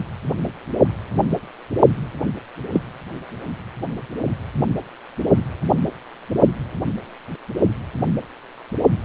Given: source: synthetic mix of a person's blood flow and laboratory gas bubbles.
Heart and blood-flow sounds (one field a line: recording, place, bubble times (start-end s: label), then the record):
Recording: Doppler ultrasound of blood flow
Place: precordium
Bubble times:
2.74-2.81 s: bubbles
From the record:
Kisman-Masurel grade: 113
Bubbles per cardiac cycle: 1 to 2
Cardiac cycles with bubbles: 1 to 10%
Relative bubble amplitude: loud (0.450 to 0.775)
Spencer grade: 1 (occasional bubble signal discernible with the cardiac motion signal, with majority of cardiac periods free of bubbles)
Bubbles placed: only in the low amplitude regions of the cardiac cycle